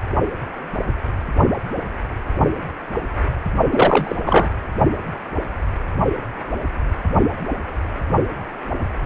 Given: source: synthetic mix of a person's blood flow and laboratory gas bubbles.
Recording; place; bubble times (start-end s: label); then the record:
Doppler ultrasound of blood flow; precordium
3.70-4.16 s: bubbles
4.26-4.49 s: bubbles
From the record:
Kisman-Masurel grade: 223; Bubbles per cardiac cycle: several, 3 to 8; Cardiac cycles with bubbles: 10 to 50%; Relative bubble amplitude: loud (0.450 to 0.775); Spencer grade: 2 (many but less than half of the cardiac periods contain bubble signals, singularly or in groups); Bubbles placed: only in the low amplitude regions of the cardiac cycle